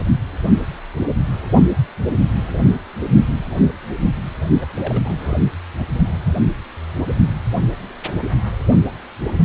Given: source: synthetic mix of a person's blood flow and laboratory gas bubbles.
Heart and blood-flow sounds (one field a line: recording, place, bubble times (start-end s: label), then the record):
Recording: Doppler ultrasound of blood flow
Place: precordium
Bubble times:
4.60-5.38 s: bubbles
5.76-5.84 s: bubbles
From the record:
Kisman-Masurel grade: 211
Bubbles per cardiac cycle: several, 3 to 8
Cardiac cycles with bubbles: 1 to 10%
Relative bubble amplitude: barely perceptible (0.100 to 0.250)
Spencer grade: 1 (occasional bubble signal discernible with the cardiac motion signal, with majority of cardiac periods free of bubbles)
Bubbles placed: only in the low amplitude regions of the cardiac cycle